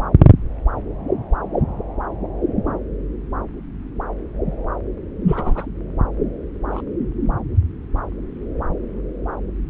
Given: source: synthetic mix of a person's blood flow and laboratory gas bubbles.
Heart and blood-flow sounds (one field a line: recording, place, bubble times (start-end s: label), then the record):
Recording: Doppler ultrasound of blood flow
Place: subclavian vein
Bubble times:
5.27-5.67 s: bubbles
6.71-6.82 s: bubbles
From the record:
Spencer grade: 2 (many but less than half of the cardiac periods contain bubble signals, singularly or in groups)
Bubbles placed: anywhere in the cardiac cycle